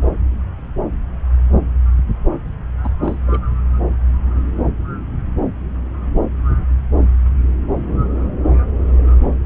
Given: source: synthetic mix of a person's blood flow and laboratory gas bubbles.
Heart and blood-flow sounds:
Doppler ultrasound of blood flow; subclavian vein
2.83-2.90 s: bubbles
3.02-3.15 s: bubbles
3.26-3.40 s: bubbles
From the record:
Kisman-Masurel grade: 221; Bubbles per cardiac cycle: several, 3 to 8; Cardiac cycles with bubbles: 10 to 50%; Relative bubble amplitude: barely perceptible (0.100 to 0.250); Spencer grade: 2 (many but less than half of the cardiac periods contain bubble signals, singularly or in groups); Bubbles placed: anywhere in the cardiac cycle

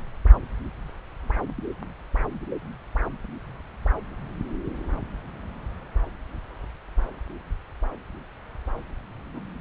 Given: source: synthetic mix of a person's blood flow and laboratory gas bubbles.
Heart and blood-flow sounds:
Doppler ultrasound of blood flow; subclavian vein
9.34-9.40 s: bubbles
From the record:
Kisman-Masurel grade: 111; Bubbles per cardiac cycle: 1 to 2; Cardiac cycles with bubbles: 1 to 10%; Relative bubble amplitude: barely perceptible (0.100 to 0.250); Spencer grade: 1 (occasional bubble signal discernible with the cardiac motion signal, with majority of cardiac periods free of bubbles); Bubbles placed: anywhere in the cardiac cycle

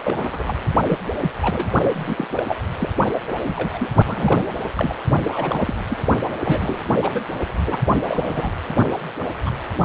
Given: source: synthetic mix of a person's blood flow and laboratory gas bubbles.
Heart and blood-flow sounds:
Doppler ultrasound of blood flow; precordium
0.04-0.56 s: bubbles
0.89-0.98 s: bubbles
1.22-1.30 s: bubbles
1.42-1.67 s: bubbles
1.93-2.27 s: bubbles
2.36-2.44 s: bubbles
2.48-2.56 s: bubbles
2.77-2.89 s: bubbles
3.27-3.38 s: bubbles
3.46-3.90 s: bubbles
4.04-4.46 s: bubbles
4.75-4.95 s: bubbles
5.24-5.75 s: bubbles
5.89-5.97 s: bubbles
6.43-6.99 s: bubbles
7.01-7.24 s: bubbles
7.66-7.79 s: bubbles
7.86-8.53 s: bubbles
9.46-9.51 s: bubbles
From the record:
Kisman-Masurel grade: 242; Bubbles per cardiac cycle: several, 3 to 8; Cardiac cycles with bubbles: 100%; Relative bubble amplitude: moderate (0.250 to 0.450); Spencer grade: 3 (all of the cardiac periods contain showers or single bubble signals, but not dominating or overriding the cardiac motion signals); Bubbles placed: only in the low amplitude regions of the cardiac cycle

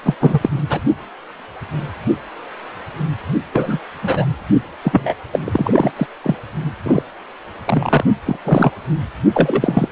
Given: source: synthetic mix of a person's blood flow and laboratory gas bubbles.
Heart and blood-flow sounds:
Doppler ultrasound of blood flow; precordium
0.02-0.15 s: bubbles
0.20-0.39 s: bubbles
0.42-0.49 s: bubbles
0.69-0.80 s: bubbles
3.52-3.79 s: bubbles
4.02-4.26 s: bubbles
4.82-5.14 s: bubbles
5.32-5.39 s: bubbles
5.44-5.92 s: bubbles
5.96-6.07 s: bubbles
6.24-6.36 s: bubbles
6.83-7.04 s: bubbles
7.66-8.04 s: bubbles
8.26-8.37 s: bubbles
8.45-8.71 s: bubbles
9.34-9.88 s: bubbles
From the record:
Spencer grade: 3 (all of the cardiac periods contain showers or single bubble signals, but not dominating or overriding the cardiac motion signals); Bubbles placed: only in the low amplitude regions of the cardiac cycle

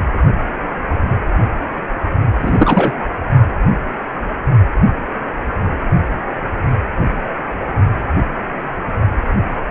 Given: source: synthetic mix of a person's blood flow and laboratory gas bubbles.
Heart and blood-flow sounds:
Doppler ultrasound of blood flow; precordium
2.40-2.98 s: bubbles
From the record:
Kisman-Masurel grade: 213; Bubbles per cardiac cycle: several, 3 to 8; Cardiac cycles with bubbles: 1 to 10%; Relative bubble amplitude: loud (0.450 to 0.775); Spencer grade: 1 (occasional bubble signal discernible with the cardiac motion signal, with majority of cardiac periods free of bubbles); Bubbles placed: only in the low amplitude regions of the cardiac cycle

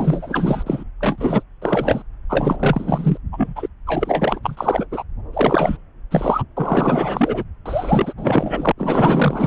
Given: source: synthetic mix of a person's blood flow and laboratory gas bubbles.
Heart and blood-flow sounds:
Doppler ultrasound of blood flow; subclavian vein
0.00-0.64 s: bubbles
0.66-0.84 s: bubbles
1.00-1.43 s: bubbles
1.61-2.03 s: bubbles
2.29-3.18 s: bubbles
3.32-3.68 s: bubbles
3.86-4.40 s: bubbles
4.42-4.87 s: bubbles
4.91-5.03 s: bubbles
5.33-5.77 s: bubbles
6.11-6.44 s: bubbles
6.57-7.44 s: bubbles
7.66-8.13 s: bubbles
8.17-8.72 s: bubbles
8.78-9.47 s: bubbles
From the record:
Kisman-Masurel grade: 444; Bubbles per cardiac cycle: continuous sound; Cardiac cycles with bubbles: 100%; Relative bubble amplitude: maximal (0.775 to 0.999); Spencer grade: 4 (maximum detectable bubble signal sounding continuously throughout systole and diastole of every cardiac period, and overriding the amplitude of the normal cardiac signals); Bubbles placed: anywhere in the cardiac cycle

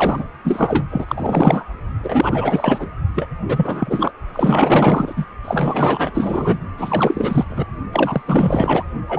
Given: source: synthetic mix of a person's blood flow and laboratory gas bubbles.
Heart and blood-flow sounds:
Doppler ultrasound of blood flow; precordium
0.00-0.24 s: bubbles
0.44-0.85 s: bubbles
0.90-1.64 s: bubbles
2.02-2.91 s: bubbles
3.15-3.29 s: bubbles
3.45-4.11 s: bubbles
4.33-5.25 s: bubbles
5.44-6.10 s: bubbles
6.14-6.58 s: bubbles
6.77-7.45 s: bubbles
7.49-7.64 s: bubbles
7.92-8.21 s: bubbles
8.26-8.84 s: bubbles
9.08-9.19 s: bubbles
From the record:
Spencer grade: 4 (maximum detectable bubble signal sounding continuously throughout systole and diastole of every cardiac period, and overriding the amplitude of the normal cardiac signals); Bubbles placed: only in the low amplitude regions of the cardiac cycle

